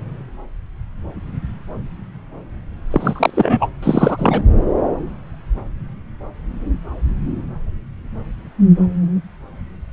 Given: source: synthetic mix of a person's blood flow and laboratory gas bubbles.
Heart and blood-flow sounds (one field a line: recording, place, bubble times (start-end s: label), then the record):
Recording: Doppler ultrasound of blood flow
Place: subclavian vein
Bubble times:
2.91-3.67 s: bubbles
3.82-4.44 s: bubbles
From the record:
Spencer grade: 2 (many but less than half of the cardiac periods contain bubble signals, singularly or in groups)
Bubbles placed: anywhere in the cardiac cycle